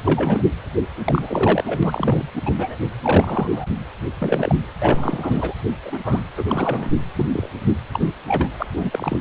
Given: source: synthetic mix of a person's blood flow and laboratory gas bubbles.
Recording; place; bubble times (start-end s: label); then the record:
Doppler ultrasound of blood flow; precordium
0.04-0.43 s: bubbles
1.04-1.79 s: bubbles
1.82-2.29 s: bubbles
2.35-2.41 s: bubbles
2.46-2.53 s: bubbles
2.57-2.76 s: bubbles
3.02-3.48 s: bubbles
3.52-3.66 s: bubbles
4.21-4.55 s: bubbles
4.81-5.54 s: bubbles
5.83-6.21 s: bubbles
6.37-6.89 s: bubbles
7.16-7.28 s: bubbles
7.32-7.50 s: bubbles
7.93-8.09 s: bubbles
8.28-8.48 s: bubbles
8.59-8.66 s: bubbles
8.77-9.20 s: bubbles
From the record:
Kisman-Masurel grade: 242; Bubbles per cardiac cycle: several, 3 to 8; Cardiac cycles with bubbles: 100%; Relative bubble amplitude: moderate (0.250 to 0.450); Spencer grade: 3 (all of the cardiac periods contain showers or single bubble signals, but not dominating or overriding the cardiac motion signals); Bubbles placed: anywhere in the cardiac cycle